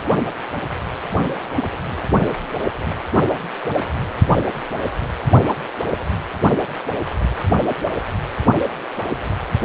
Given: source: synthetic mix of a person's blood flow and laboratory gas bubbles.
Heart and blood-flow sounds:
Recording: Doppler ultrasound of blood flow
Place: precordium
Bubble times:
no bubbles
From the record:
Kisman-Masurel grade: 000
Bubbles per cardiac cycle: 0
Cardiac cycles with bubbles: 0%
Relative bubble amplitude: no bubbles discernible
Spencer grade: 0 (complete lack of bubble signals)

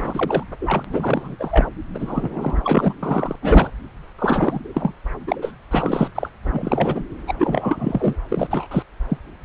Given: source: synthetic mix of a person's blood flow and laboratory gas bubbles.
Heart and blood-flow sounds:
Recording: Doppler ultrasound of blood flow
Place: subclavian vein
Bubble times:
0.00-0.44 s: bubbles
0.60-0.84 s: bubbles
0.90-1.36 s: bubbles
1.39-1.66 s: bubbles
1.94-2.93 s: bubbles
3.03-3.36 s: bubbles
3.42-3.71 s: bubbles
4.18-4.60 s: bubbles
4.74-4.94 s: bubbles
5.27-5.36 s: bubbles
5.42-5.52 s: bubbles
5.71-6.10 s: bubbles
6.14-6.29 s: bubbles
6.44-7.03 s: bubbles
7.27-7.34 s: bubbles
7.38-8.15 s: bubbles
8.29-8.48 s: bubbles
8.50-8.67 s: bubbles
8.71-8.82 s: bubbles
9.10-9.17 s: bubbles
From the record:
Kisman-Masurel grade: 342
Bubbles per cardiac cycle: rolling drumbeat, 9 or more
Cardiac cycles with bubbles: 100%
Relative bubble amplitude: moderate (0.250 to 0.450)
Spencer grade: 3 (all of the cardiac periods contain showers or single bubble signals, but not dominating or overriding the cardiac motion signals)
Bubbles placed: anywhere in the cardiac cycle

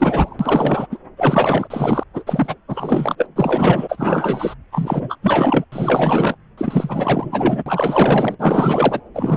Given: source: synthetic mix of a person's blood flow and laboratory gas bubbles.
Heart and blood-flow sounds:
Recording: Doppler ultrasound of blood flow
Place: subclavian vein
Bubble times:
0.00-0.37 s: bubbles
0.39-0.86 s: bubbles
0.91-0.98 s: bubbles
1.17-1.68 s: bubbles
1.70-2.03 s: bubbles
2.13-2.23 s: bubbles
2.26-2.55 s: bubbles
2.68-3.15 s: bubbles
3.18-3.26 s: bubbles
3.35-4.54 s: bubbles
4.71-5.19 s: bubbles
5.22-5.65 s: bubbles
5.72-6.36 s: bubbles
6.58-7.62 s: bubbles
7.66-8.36 s: bubbles
8.39-9.01 s: bubbles
9.14-9.37 s: bubbles
From the record:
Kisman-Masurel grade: 444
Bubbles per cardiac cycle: continuous sound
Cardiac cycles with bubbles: 100%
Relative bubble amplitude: maximal (0.775 to 0.999)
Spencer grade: 4 (maximum detectable bubble signal sounding continuously throughout systole and diastole of every cardiac period, and overriding the amplitude of the normal cardiac signals)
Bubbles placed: anywhere in the cardiac cycle

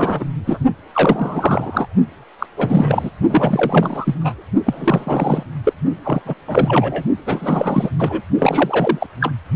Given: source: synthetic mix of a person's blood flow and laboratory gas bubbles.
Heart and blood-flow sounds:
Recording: Doppler ultrasound of blood flow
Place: precordium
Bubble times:
0.00-0.26 s: bubbles
0.46-0.59 s: bubbles
0.93-1.86 s: bubbles
2.38-2.46 s: bubbles
2.56-3.10 s: bubbles
3.29-4.15 s: bubbles
4.19-4.43 s: bubbles
4.66-5.43 s: bubbles
5.64-5.73 s: bubbles
6.03-6.23 s: bubbles
6.25-6.34 s: bubbles
6.47-7.04 s: bubbles
7.25-7.90 s: bubbles
7.98-8.22 s: bubbles
8.38-9.06 s: bubbles
9.21-9.33 s: bubbles
From the record:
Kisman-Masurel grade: 343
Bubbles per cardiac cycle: rolling drumbeat, 9 or more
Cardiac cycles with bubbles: 100%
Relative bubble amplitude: loud (0.450 to 0.775)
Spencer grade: 3 (all of the cardiac periods contain showers or single bubble signals, but not dominating or overriding the cardiac motion signals)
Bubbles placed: only in the low amplitude regions of the cardiac cycle

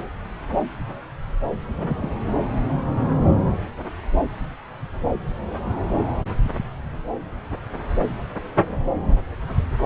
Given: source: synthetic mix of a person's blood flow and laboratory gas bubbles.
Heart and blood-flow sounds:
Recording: Doppler ultrasound of blood flow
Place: subclavian vein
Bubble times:
1.75-2.15 s: bubbles
From the record:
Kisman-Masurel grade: 221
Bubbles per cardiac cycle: several, 3 to 8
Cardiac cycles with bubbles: 10 to 50%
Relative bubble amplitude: barely perceptible (0.100 to 0.250)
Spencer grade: 2 (many but less than half of the cardiac periods contain bubble signals, singularly or in groups)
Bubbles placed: anywhere in the cardiac cycle

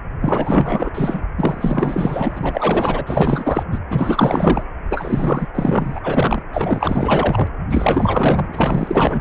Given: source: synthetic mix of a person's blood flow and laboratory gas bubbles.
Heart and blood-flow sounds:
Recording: Doppler ultrasound of blood flow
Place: precordium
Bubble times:
0.21-0.90 s: bubbles
0.94-1.23 s: bubbles
1.37-3.63 s: bubbles
3.71-3.79 s: bubbles
3.88-4.63 s: bubbles
4.89-5.47 s: bubbles
5.54-6.00 s: bubbles
6.03-6.42 s: bubbles
6.53-7.48 s: bubbles
7.69-9.21 s: bubbles
From the record:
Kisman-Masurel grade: 444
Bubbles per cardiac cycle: continuous sound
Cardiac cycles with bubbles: 100%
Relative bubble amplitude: maximal (0.775 to 0.999)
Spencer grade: 4 (maximum detectable bubble signal sounding continuously throughout systole and diastole of every cardiac period, and overriding the amplitude of the normal cardiac signals)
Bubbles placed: anywhere in the cardiac cycle

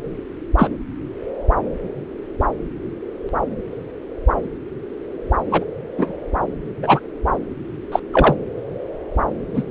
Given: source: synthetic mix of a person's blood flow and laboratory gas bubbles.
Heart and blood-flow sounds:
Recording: Doppler ultrasound of blood flow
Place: subclavian vein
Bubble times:
0.57-0.69 s: bubbles
5.52-5.64 s: bubbles
5.97-6.13 s: bubbles
6.82-6.99 s: bubbles
7.92-8.00 s: bubbles
8.13-8.37 s: bubbles
9.54-9.63 s: bubbles
From the record:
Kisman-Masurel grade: 123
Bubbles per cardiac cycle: 1 to 2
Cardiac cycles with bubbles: 10 to 50%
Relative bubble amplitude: loud (0.450 to 0.775)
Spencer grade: 2 (many but less than half of the cardiac periods contain bubble signals, singularly or in groups)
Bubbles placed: anywhere in the cardiac cycle

